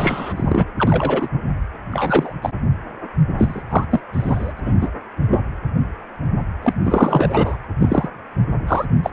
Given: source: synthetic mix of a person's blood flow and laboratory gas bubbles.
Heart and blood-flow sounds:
Doppler ultrasound of blood flow; precordium
0.00-0.34 s: bubbles
0.36-0.65 s: bubbles
0.78-1.29 s: bubbles
1.91-2.33 s: bubbles
2.42-2.50 s: bubbles
3.38-3.62 s: bubbles
3.69-3.85 s: bubbles
3.91-4.00 s: bubbles
4.13-4.52 s: bubbles
4.56-4.59 s: bubbles
4.64-4.75 s: bubbles
4.80-4.89 s: bubbles
5.29-5.44 s: bubbles
6.63-6.75 s: bubbles
6.84-7.57 s: bubbles
7.79-8.08 s: bubbles
8.67-8.86 s: bubbles
9.03-9.10 s: bubbles
From the record:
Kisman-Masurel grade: 233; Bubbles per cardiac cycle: several, 3 to 8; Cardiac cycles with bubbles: 50 to 99%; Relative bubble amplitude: loud (0.450 to 0.775); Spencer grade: 3 (all of the cardiac periods contain showers or single bubble signals, but not dominating or overriding the cardiac motion signals); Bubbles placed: anywhere in the cardiac cycle

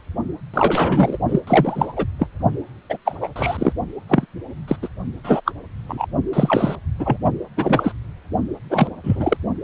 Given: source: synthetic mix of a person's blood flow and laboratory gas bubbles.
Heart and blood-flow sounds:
Doppler ultrasound of blood flow; precordium
0.54-1.18 s: bubbles
1.28-1.41 s: bubbles
1.47-1.93 s: bubbles
1.96-2.05 s: bubbles
2.19-2.27 s: bubbles
2.90-2.98 s: bubbles
3.05-3.18 s: bubbles
3.21-3.29 s: bubbles
3.35-3.73 s: bubbles
4.08-4.26 s: bubbles
4.67-4.76 s: bubbles
4.82-4.88 s: bubbles
5.24-5.41 s: bubbles
5.46-5.51 s: bubbles
5.88-6.06 s: bubbles
6.33-6.75 s: bubbles
6.99-7.17 s: bubbles
7.56-7.93 s: bubbles
8.70-8.88 s: bubbles
9.04-9.37 s: bubbles
From the record:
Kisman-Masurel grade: 233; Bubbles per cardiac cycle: several, 3 to 8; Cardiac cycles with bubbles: 50 to 99%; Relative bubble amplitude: loud (0.450 to 0.775); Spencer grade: 3 (all of the cardiac periods contain showers or single bubble signals, but not dominating or overriding the cardiac motion signals); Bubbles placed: only in the low amplitude regions of the cardiac cycle

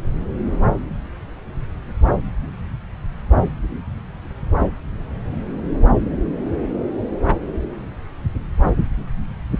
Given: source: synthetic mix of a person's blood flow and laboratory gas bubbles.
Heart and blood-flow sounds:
Doppler ultrasound of blood flow; subclavian vein
no bubbles
From the record:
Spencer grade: 0 (complete lack of bubble signals)

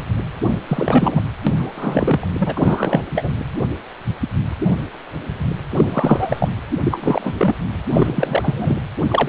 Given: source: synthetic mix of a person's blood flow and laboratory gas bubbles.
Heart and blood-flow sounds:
Doppler ultrasound of blood flow; precordium
0.46-0.50 s: bubbles
0.68-1.22 s: bubbles
1.46-2.29 s: bubbles
2.39-3.03 s: bubbles
3.15-3.31 s: bubbles
5.71-6.49 s: bubbles
6.83-7.35 s: bubbles
7.38-7.55 s: bubbles
7.94-8.79 s: bubbles
9.08-9.28 s: bubbles
From the record:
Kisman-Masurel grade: 333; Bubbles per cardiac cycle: rolling drumbeat, 9 or more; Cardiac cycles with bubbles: 50 to 99%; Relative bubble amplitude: loud (0.450 to 0.775); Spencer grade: 3 (all of the cardiac periods contain showers or single bubble signals, but not dominating or overriding the cardiac motion signals); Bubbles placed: anywhere in the cardiac cycle

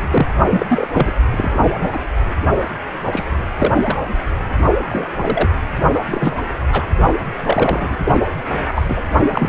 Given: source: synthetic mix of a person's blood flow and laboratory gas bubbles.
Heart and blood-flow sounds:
Doppler ultrasound of blood flow; precordium
0.00-0.35 s: bubbles
0.51-0.66 s: bubbles
0.69-0.88 s: bubbles
0.93-1.12 s: bubbles
1.31-1.52 s: bubbles
1.75-1.89 s: bubbles
1.93-1.97 s: bubbles
3.05-3.25 s: bubbles
3.58-3.73 s: bubbles
3.81-3.96 s: bubbles
4.90-5.08 s: bubbles
5.19-5.49 s: bubbles
5.93-6.03 s: bubbles
6.10-6.37 s: bubbles
6.72-6.87 s: bubbles
7.43-7.97 s: bubbles
8.04-8.21 s: bubbles
8.75-8.83 s: bubbles
8.88-9.02 s: bubbles
9.17-9.49 s: bubbles
From the record:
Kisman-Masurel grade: 242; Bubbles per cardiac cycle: several, 3 to 8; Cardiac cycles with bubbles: 100%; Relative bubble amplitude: moderate (0.250 to 0.450); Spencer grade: 3 (all of the cardiac periods contain showers or single bubble signals, but not dominating or overriding the cardiac motion signals); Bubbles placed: only in the low amplitude regions of the cardiac cycle

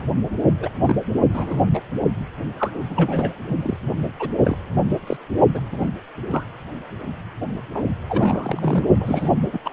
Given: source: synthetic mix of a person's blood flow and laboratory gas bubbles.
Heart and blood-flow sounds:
Doppler ultrasound of blood flow; precordium
0.00-0.04 s: bubbles
0.59-0.69 s: bubbles
0.78-0.95 s: bubbles
1.33-1.64 s: bubbles
1.73-1.81 s: bubbles
2.58-3.32 s: bubbles
3.49-3.56 s: bubbles
3.62-3.77 s: bubbles
4.19-4.29 s: bubbles
4.44-4.58 s: bubbles
5.07-5.17 s: bubbles
5.54-5.61 s: bubbles
5.71-5.90 s: bubbles
6.27-6.44 s: bubbles
7.74-7.83 s: bubbles
8.09-8.84 s: bubbles
9.00-9.29 s: bubbles
9.52-9.59 s: bubbles
9.64-9.70 s: bubbles
From the record:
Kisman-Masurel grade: 242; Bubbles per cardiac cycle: several, 3 to 8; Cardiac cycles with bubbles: 100%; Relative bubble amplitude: moderate (0.250 to 0.450); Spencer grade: 3 (all of the cardiac periods contain showers or single bubble signals, but not dominating or overriding the cardiac motion signals); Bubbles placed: only in the low amplitude regions of the cardiac cycle

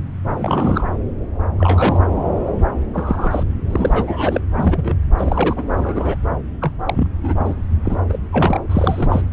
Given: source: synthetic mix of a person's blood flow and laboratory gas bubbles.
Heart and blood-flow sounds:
Doppler ultrasound of blood flow; subclavian vein
0.39-0.87 s: bubbles
1.57-2.03 s: bubbles
2.93-3.43 s: bubbles
3.69-4.42 s: bubbles
4.54-4.95 s: bubbles
5.18-5.63 s: bubbles
5.78-6.16 s: bubbles
6.61-6.71 s: bubbles
6.86-7.08 s: bubbles
7.24-7.35 s: bubbles
7.39-7.56 s: bubbles
7.85-7.96 s: bubbles
8.09-8.19 s: bubbles
8.32-8.61 s: bubbles
8.69-9.21 s: bubbles
9.31-9.33 s: bubbles
From the record:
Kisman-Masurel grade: 232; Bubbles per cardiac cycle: several, 3 to 8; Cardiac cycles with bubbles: 50 to 99%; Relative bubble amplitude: moderate (0.250 to 0.450); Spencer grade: 3 (all of the cardiac periods contain showers or single bubble signals, but not dominating or overriding the cardiac motion signals); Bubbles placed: anywhere in the cardiac cycle

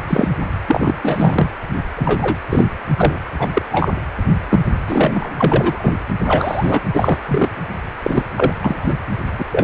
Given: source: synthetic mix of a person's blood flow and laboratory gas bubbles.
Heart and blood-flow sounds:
Doppler ultrasound of blood flow; precordium
0.07-0.29 s: bubbles
0.67-0.95 s: bubbles
1.02-1.51 s: bubbles
1.96-2.39 s: bubbles
2.50-2.65 s: bubbles
2.98-3.19 s: bubbles
3.39-3.49 s: bubbles
3.54-3.62 s: bubbles
3.72-3.92 s: bubbles
4.50-4.60 s: bubbles
4.88-5.31 s: bubbles
5.36-5.92 s: bubbles
6.25-6.80 s: bubbles
6.93-7.18 s: bubbles
7.28-7.48 s: bubbles
8.04-8.23 s: bubbles
8.36-8.53 s: bubbles
8.61-8.97 s: bubbles
9.38-9.45 s: bubbles
9.52-9.64 s: bubbles
From the record:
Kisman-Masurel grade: 243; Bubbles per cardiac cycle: several, 3 to 8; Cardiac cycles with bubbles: 100%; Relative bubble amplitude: loud (0.450 to 0.775); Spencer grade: 3 (all of the cardiac periods contain showers or single bubble signals, but not dominating or overriding the cardiac motion signals); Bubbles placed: anywhere in the cardiac cycle

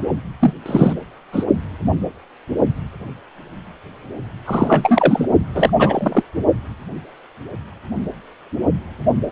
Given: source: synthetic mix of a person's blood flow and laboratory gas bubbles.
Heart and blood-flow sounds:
Doppler ultrasound of blood flow; precordium
0.39-0.53 s: bubbles
0.66-0.93 s: bubbles
1.32-1.44 s: bubbles
4.46-5.28 s: bubbles
5.54-5.70 s: bubbles
5.79-6.23 s: bubbles
From the record:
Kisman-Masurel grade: 223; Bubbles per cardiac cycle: several, 3 to 8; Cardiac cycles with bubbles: 10 to 50%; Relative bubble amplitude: loud (0.450 to 0.775); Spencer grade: 2 (many but less than half of the cardiac periods contain bubble signals, singularly or in groups); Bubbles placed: only in the low amplitude regions of the cardiac cycle

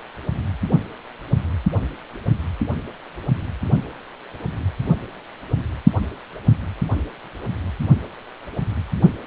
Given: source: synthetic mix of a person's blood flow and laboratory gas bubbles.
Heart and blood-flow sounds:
Doppler ultrasound of blood flow; precordium
no bubbles
From the record:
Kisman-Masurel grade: 000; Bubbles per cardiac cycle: 0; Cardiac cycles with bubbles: 0%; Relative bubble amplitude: no bubbles discernible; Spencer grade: 0 (complete lack of bubble signals)

